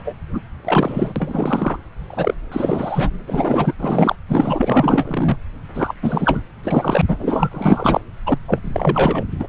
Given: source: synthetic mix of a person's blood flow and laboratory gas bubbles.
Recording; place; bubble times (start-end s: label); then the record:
Doppler ultrasound of blood flow; subclavian vein
0.00-0.14 s: bubbles
0.34-0.42 s: bubbles
0.65-1.13 s: bubbles
1.15-1.77 s: bubbles
2.10-2.34 s: bubbles
2.52-3.74 s: bubbles
3.78-4.16 s: bubbles
4.29-5.38 s: bubbles
5.74-5.95 s: bubbles
6.02-6.40 s: bubbles
6.63-7.02 s: bubbles
7.07-8.01 s: bubbles
8.26-8.38 s: bubbles
8.47-8.60 s: bubbles
8.64-9.24 s: bubbles
9.39-9.47 s: bubbles
From the record:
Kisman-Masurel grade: 444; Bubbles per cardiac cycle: continuous sound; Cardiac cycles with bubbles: 100%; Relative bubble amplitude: maximal (0.775 to 0.999); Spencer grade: 4 (maximum detectable bubble signal sounding continuously throughout systole and diastole of every cardiac period, and overriding the amplitude of the normal cardiac signals); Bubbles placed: anywhere in the cardiac cycle